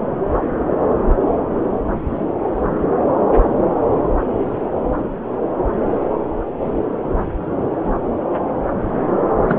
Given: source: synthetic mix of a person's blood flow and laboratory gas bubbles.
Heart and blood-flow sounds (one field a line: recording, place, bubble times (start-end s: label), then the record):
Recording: Doppler ultrasound of blood flow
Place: subclavian vein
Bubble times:
9.48-9.56 s: bubbles
From the record:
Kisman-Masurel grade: 113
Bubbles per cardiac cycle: 1 to 2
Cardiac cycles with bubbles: 1 to 10%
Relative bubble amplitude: loud (0.450 to 0.775)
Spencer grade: 1 (occasional bubble signal discernible with the cardiac motion signal, with majority of cardiac periods free of bubbles)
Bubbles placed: anywhere in the cardiac cycle